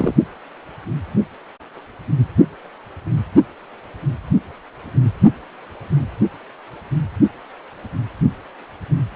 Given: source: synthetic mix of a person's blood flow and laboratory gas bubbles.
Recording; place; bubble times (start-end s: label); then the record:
Doppler ultrasound of blood flow; precordium
0.00-0.14 s: bubbles
From the record:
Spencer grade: 2 (many but less than half of the cardiac periods contain bubble signals, singularly or in groups); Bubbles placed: only in the low amplitude regions of the cardiac cycle